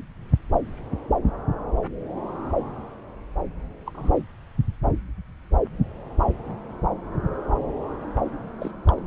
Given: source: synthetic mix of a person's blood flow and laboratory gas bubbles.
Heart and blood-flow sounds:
Doppler ultrasound of blood flow; subclavian vein
3.86-4.21 s: bubbles
8.60-8.71 s: bubbles
8.87-9.03 s: bubbles
From the record:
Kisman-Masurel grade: 221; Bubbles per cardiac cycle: several, 3 to 8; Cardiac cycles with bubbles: 10 to 50%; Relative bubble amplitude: barely perceptible (0.100 to 0.250); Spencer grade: 2 (many but less than half of the cardiac periods contain bubble signals, singularly or in groups); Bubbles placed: anywhere in the cardiac cycle

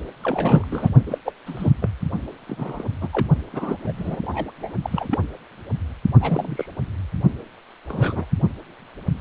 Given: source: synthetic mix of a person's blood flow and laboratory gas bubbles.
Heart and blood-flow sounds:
Doppler ultrasound of blood flow; precordium
0.23-0.66 s: bubbles
0.71-0.91 s: bubbles
1.06-1.18 s: bubbles
1.25-1.32 s: bubbles
1.46-1.71 s: bubbles
1.81-1.90 s: bubbles
2.47-2.85 s: bubbles
3.01-3.08 s: bubbles
3.12-3.29 s: bubbles
3.52-3.77 s: bubbles
3.83-3.92 s: bubbles
3.98-4.52 s: bubbles
4.58-4.75 s: bubbles
4.82-5.19 s: bubbles
6.21-6.66 s: bubbles
7.89-8.26 s: bubbles
From the record:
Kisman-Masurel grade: 232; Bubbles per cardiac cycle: several, 3 to 8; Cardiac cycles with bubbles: 50 to 99%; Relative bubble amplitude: moderate (0.250 to 0.450); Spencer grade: 3 (all of the cardiac periods contain showers or single bubble signals, but not dominating or overriding the cardiac motion signals); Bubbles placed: only in the low amplitude regions of the cardiac cycle

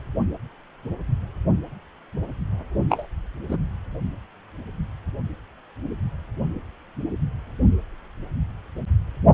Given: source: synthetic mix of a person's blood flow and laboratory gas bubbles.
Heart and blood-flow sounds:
Doppler ultrasound of blood flow; precordium
2.89-3.07 s: bubbles
3.49-3.57 s: bubbles
From the record:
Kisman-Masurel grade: 122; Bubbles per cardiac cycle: 1 to 2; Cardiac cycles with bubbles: 10 to 50%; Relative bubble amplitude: moderate (0.250 to 0.450); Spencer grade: 2 (many but less than half of the cardiac periods contain bubble signals, singularly or in groups); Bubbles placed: only in the low amplitude regions of the cardiac cycle

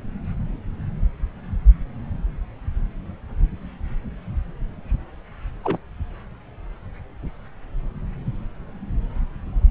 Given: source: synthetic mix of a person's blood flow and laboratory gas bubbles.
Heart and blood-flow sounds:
Doppler ultrasound of blood flow; subclavian vein
5.64-5.78 s: bubbles
From the record:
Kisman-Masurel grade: 211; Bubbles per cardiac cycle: several, 3 to 8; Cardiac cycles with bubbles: 1 to 10%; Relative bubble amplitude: barely perceptible (0.100 to 0.250); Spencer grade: 1 (occasional bubble signal discernible with the cardiac motion signal, with majority of cardiac periods free of bubbles); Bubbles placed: anywhere in the cardiac cycle

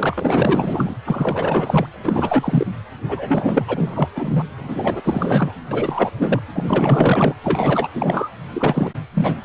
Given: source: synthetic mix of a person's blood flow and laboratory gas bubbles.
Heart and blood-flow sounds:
Doppler ultrasound of blood flow; precordium
0.00-0.95 s: bubbles
1.05-1.87 s: bubbles
2.04-2.67 s: bubbles
3.08-3.65 s: bubbles
3.67-4.08 s: bubbles
4.15-4.42 s: bubbles
4.57-5.01 s: bubbles
5.04-5.53 s: bubbles
5.71-6.11 s: bubbles
6.17-6.41 s: bubbles
6.54-7.34 s: bubbles
7.43-7.88 s: bubbles
7.94-8.29 s: bubbles
8.53-8.90 s: bubbles
9.13-9.45 s: bubbles
From the record:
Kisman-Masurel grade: 444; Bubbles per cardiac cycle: continuous sound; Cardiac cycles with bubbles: 100%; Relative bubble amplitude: maximal (0.775 to 0.999); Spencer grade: 4 (maximum detectable bubble signal sounding continuously throughout systole and diastole of every cardiac period, and overriding the amplitude of the normal cardiac signals); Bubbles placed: anywhere in the cardiac cycle

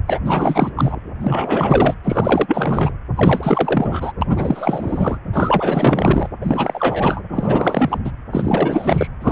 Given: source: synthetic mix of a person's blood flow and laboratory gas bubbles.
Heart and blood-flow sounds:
Doppler ultrasound of blood flow; precordium
0.07-0.20 s: bubbles
0.24-0.70 s: bubbles
0.75-0.99 s: bubbles
1.21-1.94 s: bubbles
2.04-2.94 s: bubbles
3.16-4.12 s: bubbles
4.21-5.19 s: bubbles
5.33-6.28 s: bubbles
6.41-7.21 s: bubbles
7.28-7.98 s: bubbles
8.04-8.12 s: bubbles
8.31-9.07 s: bubbles
9.20-9.32 s: bubbles
From the record:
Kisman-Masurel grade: 444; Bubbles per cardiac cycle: continuous sound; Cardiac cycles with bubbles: 100%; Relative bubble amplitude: maximal (0.775 to 0.999); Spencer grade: 4 (maximum detectable bubble signal sounding continuously throughout systole and diastole of every cardiac period, and overriding the amplitude of the normal cardiac signals); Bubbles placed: anywhere in the cardiac cycle

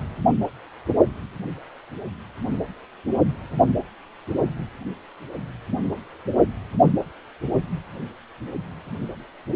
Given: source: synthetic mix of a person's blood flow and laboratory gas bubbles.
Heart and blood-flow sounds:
Doppler ultrasound of blood flow; precordium
4.30-4.34 s: bubbles
From the record:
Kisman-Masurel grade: 111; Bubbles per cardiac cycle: 1 to 2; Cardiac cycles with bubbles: 1 to 10%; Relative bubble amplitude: barely perceptible (0.100 to 0.250); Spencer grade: 1 (occasional bubble signal discernible with the cardiac motion signal, with majority of cardiac periods free of bubbles); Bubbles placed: only in the low amplitude regions of the cardiac cycle

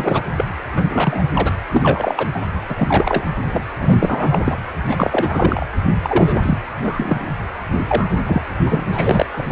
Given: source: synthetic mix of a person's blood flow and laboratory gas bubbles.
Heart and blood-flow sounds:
Doppler ultrasound of blood flow; precordium
0.00-0.26 s: bubbles
0.37-0.45 s: bubbles
0.76-0.83 s: bubbles
0.90-1.24 s: bubbles
1.33-1.53 s: bubbles
1.71-2.28 s: bubbles
2.33-2.42 s: bubbles
2.69-3.31 s: bubbles
3.52-3.64 s: bubbles
3.79-3.96 s: bubbles
3.99-4.58 s: bubbles
4.87-5.66 s: bubbles
6.02-6.58 s: bubbles
6.83-7.25 s: bubbles
7.87-8.11 s: bubbles
8.26-8.42 s: bubbles
8.65-8.84 s: bubbles
8.89-9.26 s: bubbles
9.37-9.52 s: bubbles
From the record:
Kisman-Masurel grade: 333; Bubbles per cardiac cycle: rolling drumbeat, 9 or more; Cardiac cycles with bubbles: 50 to 99%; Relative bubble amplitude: loud (0.450 to 0.775); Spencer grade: 3 (all of the cardiac periods contain showers or single bubble signals, but not dominating or overriding the cardiac motion signals); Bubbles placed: anywhere in the cardiac cycle

